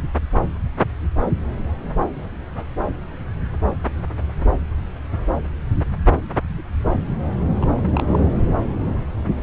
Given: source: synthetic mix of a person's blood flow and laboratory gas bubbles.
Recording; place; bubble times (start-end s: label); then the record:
Doppler ultrasound of blood flow; subclavian vein
7.59-7.89 s: bubbles
7.93-8.34 s: bubbles
From the record:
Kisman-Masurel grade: 212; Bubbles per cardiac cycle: several, 3 to 8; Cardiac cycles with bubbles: 1 to 10%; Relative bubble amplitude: moderate (0.250 to 0.450); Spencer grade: 1 (occasional bubble signal discernible with the cardiac motion signal, with majority of cardiac periods free of bubbles); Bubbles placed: anywhere in the cardiac cycle